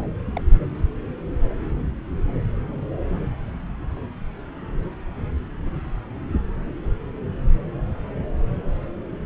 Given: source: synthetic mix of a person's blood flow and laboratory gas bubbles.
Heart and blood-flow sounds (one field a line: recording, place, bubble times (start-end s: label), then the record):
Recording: Doppler ultrasound of blood flow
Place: subclavian vein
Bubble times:
0.00-0.09 s: bubbles
0.36-0.41 s: bubbles
From the record:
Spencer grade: 2 (many but less than half of the cardiac periods contain bubble signals, singularly or in groups)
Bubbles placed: anywhere in the cardiac cycle